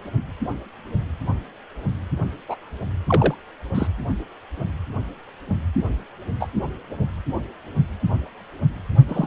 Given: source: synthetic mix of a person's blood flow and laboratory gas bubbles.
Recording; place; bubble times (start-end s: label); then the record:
Doppler ultrasound of blood flow; precordium
2.48-2.55 s: bubbles
3.06-3.34 s: bubbles
3.74-3.87 s: bubbles
6.39-6.47 s: bubbles
9.08-9.27 s: bubbles
From the record:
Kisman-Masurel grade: 122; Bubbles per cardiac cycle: 1 to 2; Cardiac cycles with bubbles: 10 to 50%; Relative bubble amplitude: moderate (0.250 to 0.450); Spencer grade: 2 (many but less than half of the cardiac periods contain bubble signals, singularly or in groups); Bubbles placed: anywhere in the cardiac cycle